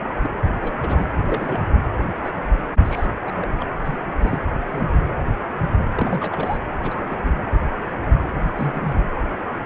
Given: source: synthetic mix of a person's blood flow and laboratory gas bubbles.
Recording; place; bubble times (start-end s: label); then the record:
Doppler ultrasound of blood flow; precordium
0.21-0.30 s: bubbles
0.62-0.72 s: bubbles
0.79-1.09 s: bubbles
1.23-1.70 s: bubbles
2.23-2.30 s: bubbles
2.74-2.81 s: bubbles
2.84-3.06 s: bubbles
3.27-3.33 s: bubbles
3.41-3.47 s: bubbles
3.59-3.65 s: bubbles
3.84-3.98 s: bubbles
4.22-4.41 s: bubbles
4.67-4.85 s: bubbles
5.96-6.58 s: bubbles
6.82-7.20 s: bubbles
7.25-7.41 s: bubbles
8.46-8.96 s: bubbles
From the record:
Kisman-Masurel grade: 232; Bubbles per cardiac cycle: several, 3 to 8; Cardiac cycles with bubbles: 50 to 99%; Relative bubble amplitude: moderate (0.250 to 0.450); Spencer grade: 3 (all of the cardiac periods contain showers or single bubble signals, but not dominating or overriding the cardiac motion signals); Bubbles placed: anywhere in the cardiac cycle